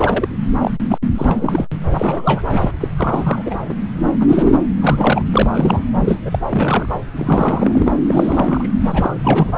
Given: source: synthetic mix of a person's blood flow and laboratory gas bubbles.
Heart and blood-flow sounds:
Doppler ultrasound of blood flow; subclavian vein
0.00-0.28 s: bubbles
0.61-0.71 s: bubbles
0.88-0.98 s: bubbles
1.17-1.67 s: bubbles
1.98-2.42 s: bubbles
2.51-2.71 s: bubbles
2.80-2.88 s: bubbles
2.96-3.42 s: bubbles
3.46-3.58 s: bubbles
3.68-3.74 s: bubbles
4.19-4.54 s: bubbles
4.81-5.24 s: bubbles
5.32-5.82 s: bubbles
6.04-6.21 s: bubbles
6.25-6.39 s: bubbles
6.49-6.99 s: bubbles
7.16-7.92 s: bubbles
8.07-8.67 s: bubbles
8.84-9.15 s: bubbles
9.23-9.52 s: bubbles
From the record:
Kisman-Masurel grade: 243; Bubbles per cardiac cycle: several, 3 to 8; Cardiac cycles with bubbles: 100%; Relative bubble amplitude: loud (0.450 to 0.775); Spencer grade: 3 (all of the cardiac periods contain showers or single bubble signals, but not dominating or overriding the cardiac motion signals); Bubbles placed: anywhere in the cardiac cycle

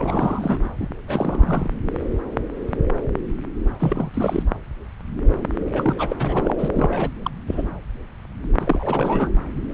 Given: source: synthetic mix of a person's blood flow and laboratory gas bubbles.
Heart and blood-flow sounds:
Doppler ultrasound of blood flow; subclavian vein
0.00-0.59 s: bubbles
0.79-0.87 s: bubbles
1.08-1.70 s: bubbles
3.79-4.10 s: bubbles
4.13-4.42 s: bubbles
5.72-6.69 s: bubbles
6.73-7.09 s: bubbles
7.22-7.30 s: bubbles
7.47-7.66 s: bubbles
8.60-9.29 s: bubbles
From the record:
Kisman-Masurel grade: 332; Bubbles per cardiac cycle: rolling drumbeat, 9 or more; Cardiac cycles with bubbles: 50 to 99%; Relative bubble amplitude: moderate (0.250 to 0.450); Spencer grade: 3 (all of the cardiac periods contain showers or single bubble signals, but not dominating or overriding the cardiac motion signals); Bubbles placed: anywhere in the cardiac cycle

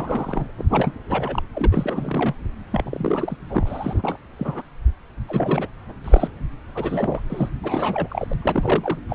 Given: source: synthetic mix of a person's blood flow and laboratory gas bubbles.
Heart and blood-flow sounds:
Doppler ultrasound of blood flow; subclavian vein
0.00-0.48 s: bubbles
0.58-0.65 s: bubbles
0.72-0.93 s: bubbles
1.08-1.43 s: bubbles
1.55-2.35 s: bubbles
2.71-3.37 s: bubbles
3.42-3.45 s: bubbles
3.48-4.17 s: bubbles
4.38-4.62 s: bubbles
5.29-5.69 s: bubbles
6.04-6.29 s: bubbles
6.75-7.21 s: bubbles
7.29-7.49 s: bubbles
7.63-8.33 s: bubbles
8.42-8.98 s: bubbles
9.09-9.15 s: bubbles
From the record:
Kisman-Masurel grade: 342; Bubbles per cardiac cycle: rolling drumbeat, 9 or more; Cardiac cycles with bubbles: 100%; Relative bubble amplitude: moderate (0.250 to 0.450); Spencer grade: 3 (all of the cardiac periods contain showers or single bubble signals, but not dominating or overriding the cardiac motion signals); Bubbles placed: anywhere in the cardiac cycle

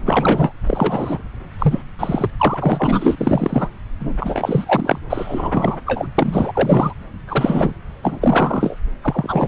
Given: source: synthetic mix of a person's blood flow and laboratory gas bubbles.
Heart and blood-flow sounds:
Doppler ultrasound of blood flow; subclavian vein
0.05-0.53 s: bubbles
0.66-1.24 s: bubbles
1.58-1.83 s: bubbles
1.99-2.29 s: bubbles
2.39-3.16 s: bubbles
3.20-3.69 s: bubbles
4.00-4.98 s: bubbles
5.09-5.79 s: bubbles
5.85-6.08 s: bubbles
6.18-6.93 s: bubbles
7.28-7.74 s: bubbles
8.02-8.76 s: bubbles
9.01-9.48 s: bubbles
From the record:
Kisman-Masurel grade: 343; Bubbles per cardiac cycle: rolling drumbeat, 9 or more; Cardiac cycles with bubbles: 100%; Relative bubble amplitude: loud (0.450 to 0.775); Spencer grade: 3 (all of the cardiac periods contain showers or single bubble signals, but not dominating or overriding the cardiac motion signals); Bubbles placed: anywhere in the cardiac cycle

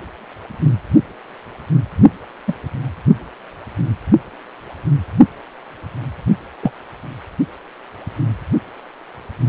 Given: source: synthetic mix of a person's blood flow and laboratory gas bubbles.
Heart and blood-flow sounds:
Doppler ultrasound of blood flow; precordium
2.48-2.53 s: bubbles
6.62-6.71 s: bubbles
From the record:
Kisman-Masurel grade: 123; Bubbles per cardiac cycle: 1 to 2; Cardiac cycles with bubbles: 10 to 50%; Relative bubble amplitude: loud (0.450 to 0.775); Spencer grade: 2 (many but less than half of the cardiac periods contain bubble signals, singularly or in groups); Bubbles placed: anywhere in the cardiac cycle

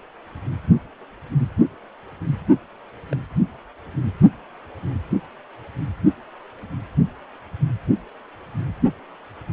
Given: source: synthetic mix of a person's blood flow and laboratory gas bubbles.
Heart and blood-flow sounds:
Doppler ultrasound of blood flow; precordium
3.11-3.16 s: bubbles
From the record:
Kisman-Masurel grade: 111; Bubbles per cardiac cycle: 1 to 2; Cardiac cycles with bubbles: 1 to 10%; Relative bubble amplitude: barely perceptible (0.100 to 0.250); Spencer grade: 1 (occasional bubble signal discernible with the cardiac motion signal, with majority of cardiac periods free of bubbles); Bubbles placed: only in the low amplitude regions of the cardiac cycle

